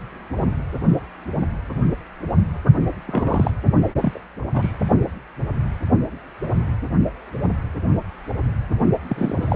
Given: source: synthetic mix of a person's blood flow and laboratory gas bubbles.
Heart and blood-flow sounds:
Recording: Doppler ultrasound of blood flow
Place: precordium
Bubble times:
3.07-3.51 s: bubbles
4.00-4.21 s: bubbles
4.54-4.72 s: bubbles
9.09-9.56 s: bubbles
From the record:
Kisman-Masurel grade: 222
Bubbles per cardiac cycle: several, 3 to 8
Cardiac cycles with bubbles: 10 to 50%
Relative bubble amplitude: moderate (0.250 to 0.450)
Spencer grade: 2 (many but less than half of the cardiac periods contain bubble signals, singularly or in groups)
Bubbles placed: only in the low amplitude regions of the cardiac cycle

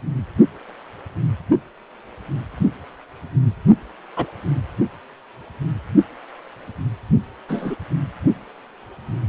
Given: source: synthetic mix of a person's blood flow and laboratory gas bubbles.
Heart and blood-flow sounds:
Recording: Doppler ultrasound of blood flow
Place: precordium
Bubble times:
4.17-4.26 s: bubbles
7.48-7.76 s: bubbles
From the record:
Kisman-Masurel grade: 122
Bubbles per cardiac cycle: 1 to 2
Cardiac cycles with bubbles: 10 to 50%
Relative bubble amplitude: moderate (0.250 to 0.450)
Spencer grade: 2 (many but less than half of the cardiac periods contain bubble signals, singularly or in groups)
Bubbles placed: only in the low amplitude regions of the cardiac cycle

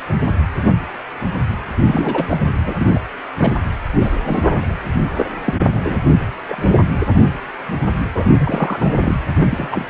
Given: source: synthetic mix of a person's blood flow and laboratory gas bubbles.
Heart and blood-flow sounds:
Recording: Doppler ultrasound of blood flow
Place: precordium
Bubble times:
1.85-2.38 s: bubbles
2.65-2.90 s: bubbles
2.94-2.98 s: bubbles
3.38-3.53 s: bubbles
3.99-4.17 s: bubbles
4.25-4.75 s: bubbles
5.16-5.25 s: bubbles
5.46-5.54 s: bubbles
5.71-5.98 s: bubbles
6.48-6.77 s: bubbles
8.14-8.25 s: bubbles
8.30-8.93 s: bubbles
9.01-9.15 s: bubbles
9.38-9.88 s: bubbles
From the record:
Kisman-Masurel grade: 232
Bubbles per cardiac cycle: several, 3 to 8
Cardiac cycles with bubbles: 50 to 99%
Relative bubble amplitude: moderate (0.250 to 0.450)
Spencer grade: 3 (all of the cardiac periods contain showers or single bubble signals, but not dominating or overriding the cardiac motion signals)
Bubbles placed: anywhere in the cardiac cycle

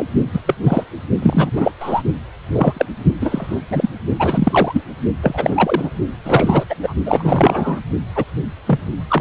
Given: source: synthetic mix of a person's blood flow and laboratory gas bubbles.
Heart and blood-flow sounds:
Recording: Doppler ultrasound of blood flow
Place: precordium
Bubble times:
0.00-0.06 s: bubbles
0.32-0.42 s: bubbles
0.46-0.55 s: bubbles
0.62-0.83 s: bubbles
1.22-1.51 s: bubbles
1.55-1.72 s: bubbles
1.80-2.02 s: bubbles
2.52-2.86 s: bubbles
3.21-3.62 s: bubbles
3.70-3.90 s: bubbles
4.19-4.82 s: bubbles
5.21-5.90 s: bubbles
6.25-6.65 s: bubbles
6.69-6.75 s: bubbles
6.82-6.94 s: bubbles
7.06-7.80 s: bubbles
8.15-8.24 s: bubbles
8.66-8.79 s: bubbles
9.08-9.21 s: bubbles
From the record:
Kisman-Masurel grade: 243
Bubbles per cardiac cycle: several, 3 to 8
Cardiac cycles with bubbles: 100%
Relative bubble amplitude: loud (0.450 to 0.775)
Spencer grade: 3 (all of the cardiac periods contain showers or single bubble signals, but not dominating or overriding the cardiac motion signals)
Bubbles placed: only in the low amplitude regions of the cardiac cycle

